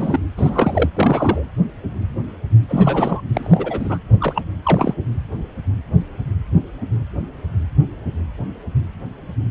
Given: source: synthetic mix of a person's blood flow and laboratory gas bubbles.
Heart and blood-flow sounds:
Doppler ultrasound of blood flow; precordium
0.00-0.20 s: bubbles
0.37-0.89 s: bubbles
0.95-1.44 s: bubbles
2.69-3.20 s: bubbles
3.33-3.98 s: bubbles
4.20-4.43 s: bubbles
4.63-4.95 s: bubbles
From the record:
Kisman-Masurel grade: 222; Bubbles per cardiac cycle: several, 3 to 8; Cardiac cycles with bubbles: 10 to 50%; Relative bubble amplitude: moderate (0.250 to 0.450); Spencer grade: 2 (many but less than half of the cardiac periods contain bubble signals, singularly or in groups); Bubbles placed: anywhere in the cardiac cycle

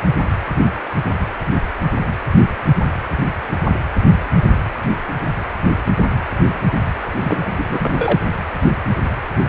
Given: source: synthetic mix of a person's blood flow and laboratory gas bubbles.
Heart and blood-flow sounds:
Doppler ultrasound of blood flow; precordium
7.21-7.51 s: bubbles
7.57-7.65 s: bubbles
7.69-7.93 s: bubbles
7.98-8.20 s: bubbles
From the record:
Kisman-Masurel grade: 212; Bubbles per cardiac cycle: several, 3 to 8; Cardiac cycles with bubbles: 1 to 10%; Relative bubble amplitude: moderate (0.250 to 0.450); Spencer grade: 1 (occasional bubble signal discernible with the cardiac motion signal, with majority of cardiac periods free of bubbles); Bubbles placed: anywhere in the cardiac cycle

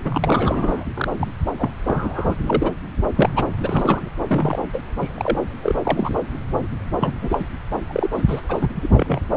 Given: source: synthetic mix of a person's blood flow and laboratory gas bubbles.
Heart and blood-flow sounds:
Doppler ultrasound of blood flow; subclavian vein
0.04-0.86 s: bubbles
0.95-1.08 s: bubbles
1.19-1.27 s: bubbles
1.58-1.70 s: bubbles
1.86-2.35 s: bubbles
2.46-2.71 s: bubbles
3.16-3.29 s: bubbles
3.35-3.46 s: bubbles
3.59-4.09 s: bubbles
4.27-4.59 s: bubbles
4.72-4.83 s: bubbles
5.01-5.08 s: bubbles
5.14-5.39 s: bubbles
5.62-5.75 s: bubbles
5.83-6.10 s: bubbles
6.99-7.12 s: bubbles
7.21-7.45 s: bubbles
7.88-8.10 s: bubbles
8.17-8.22 s: bubbles
8.28-8.41 s: bubbles
8.48-8.68 s: bubbles
8.75-8.90 s: bubbles
8.96-9.21 s: bubbles
From the record:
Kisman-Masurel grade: 342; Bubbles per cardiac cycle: rolling drumbeat, 9 or more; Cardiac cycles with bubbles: 100%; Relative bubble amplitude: moderate (0.250 to 0.450); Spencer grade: 3 (all of the cardiac periods contain showers or single bubble signals, but not dominating or overriding the cardiac motion signals); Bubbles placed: anywhere in the cardiac cycle

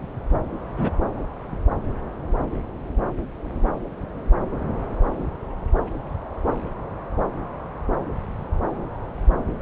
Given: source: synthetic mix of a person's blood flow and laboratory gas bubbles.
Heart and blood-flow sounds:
Doppler ultrasound of blood flow; subclavian vein
0.77-0.90 s: bubbles
From the record:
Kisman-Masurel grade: 112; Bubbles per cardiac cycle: 1 to 2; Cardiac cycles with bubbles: 1 to 10%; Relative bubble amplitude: moderate (0.250 to 0.450); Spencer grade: 1 (occasional bubble signal discernible with the cardiac motion signal, with majority of cardiac periods free of bubbles); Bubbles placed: anywhere in the cardiac cycle

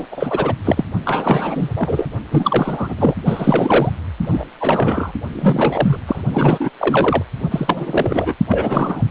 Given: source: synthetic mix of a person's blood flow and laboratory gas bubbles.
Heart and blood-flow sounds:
Doppler ultrasound of blood flow; precordium
0.00-0.06 s: bubbles
0.12-0.54 s: bubbles
0.64-0.84 s: bubbles
1.05-1.69 s: bubbles
1.75-2.12 s: bubbles
2.31-3.15 s: bubbles
3.25-3.90 s: bubbles
4.21-4.44 s: bubbles
4.60-5.11 s: bubbles
5.33-5.98 s: bubbles
6.07-6.21 s: bubbles
6.31-6.69 s: bubbles
6.77-7.23 s: bubbles
7.50-8.34 s: bubbles
8.49-9.03 s: bubbles
From the record:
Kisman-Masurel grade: 343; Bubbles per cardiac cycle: rolling drumbeat, 9 or more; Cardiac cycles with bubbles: 100%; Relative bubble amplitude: loud (0.450 to 0.775); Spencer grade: 3 (all of the cardiac periods contain showers or single bubble signals, but not dominating or overriding the cardiac motion signals); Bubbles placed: only in the low amplitude regions of the cardiac cycle

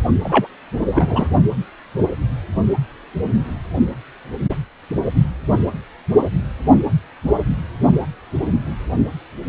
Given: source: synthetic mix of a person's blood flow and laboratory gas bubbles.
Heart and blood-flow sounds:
Doppler ultrasound of blood flow; precordium
0.24-0.47 s: bubbles
0.91-1.29 s: bubbles
From the record:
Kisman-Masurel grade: 213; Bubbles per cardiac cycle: several, 3 to 8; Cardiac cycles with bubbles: 1 to 10%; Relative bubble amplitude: loud (0.450 to 0.775); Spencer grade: 1 (occasional bubble signal discernible with the cardiac motion signal, with majority of cardiac periods free of bubbles); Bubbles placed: only in the low amplitude regions of the cardiac cycle

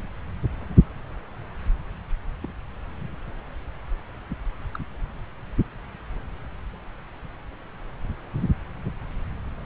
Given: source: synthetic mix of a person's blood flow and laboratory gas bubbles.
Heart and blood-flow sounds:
Doppler ultrasound of blood flow; subclavian vein
2.42-2.52 s: bubbles
4.73-4.79 s: bubbles
From the record:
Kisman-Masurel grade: 121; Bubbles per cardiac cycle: 1 to 2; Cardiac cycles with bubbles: 10 to 50%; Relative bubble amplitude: barely perceptible (0.100 to 0.250); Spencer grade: 2 (many but less than half of the cardiac periods contain bubble signals, singularly or in groups); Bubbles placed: anywhere in the cardiac cycle

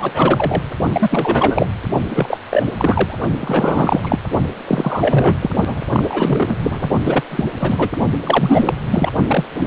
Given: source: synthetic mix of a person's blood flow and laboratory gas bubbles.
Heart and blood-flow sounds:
Doppler ultrasound of blood flow; precordium
0.00-0.11 s: bubbles
0.14-0.62 s: bubbles
0.93-1.66 s: bubbles
2.08-2.38 s: bubbles
2.50-2.63 s: bubbles
2.78-3.17 s: bubbles
3.40-4.19 s: bubbles
4.67-5.35 s: bubbles
5.40-5.51 s: bubbles
5.66-5.82 s: bubbles
5.92-6.56 s: bubbles
6.59-6.90 s: bubbles
7.04-7.22 s: bubbles
7.30-7.44 s: bubbles
7.60-7.89 s: bubbles
8.22-8.74 s: bubbles
8.91-9.11 s: bubbles
9.27-9.45 s: bubbles
9.59-9.67 s: bubbles
From the record:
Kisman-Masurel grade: 343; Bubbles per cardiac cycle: rolling drumbeat, 9 or more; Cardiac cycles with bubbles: 100%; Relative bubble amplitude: loud (0.450 to 0.775); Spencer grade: 3 (all of the cardiac periods contain showers or single bubble signals, but not dominating or overriding the cardiac motion signals); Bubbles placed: only in the low amplitude regions of the cardiac cycle

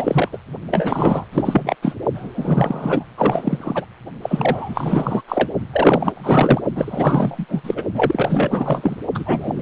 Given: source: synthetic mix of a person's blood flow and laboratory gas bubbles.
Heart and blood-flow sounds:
Doppler ultrasound of blood flow; precordium
0.00-0.28 s: bubbles
0.32-0.38 s: bubbles
0.70-1.25 s: bubbles
1.32-1.75 s: bubbles
1.82-1.96 s: bubbles
2.15-3.08 s: bubbles
3.17-3.85 s: bubbles
4.22-5.22 s: bubbles
5.28-5.49 s: bubbles
5.72-6.12 s: bubbles
6.14-6.61 s: bubbles
6.75-7.46 s: bubbles
7.48-7.83 s: bubbles
7.94-9.06 s: bubbles
9.14-9.62 s: bubbles
From the record:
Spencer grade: 4 (maximum detectable bubble signal sounding continuously throughout systole and diastole of every cardiac period, and overriding the amplitude of the normal cardiac signals); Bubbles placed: only in the low amplitude regions of the cardiac cycle

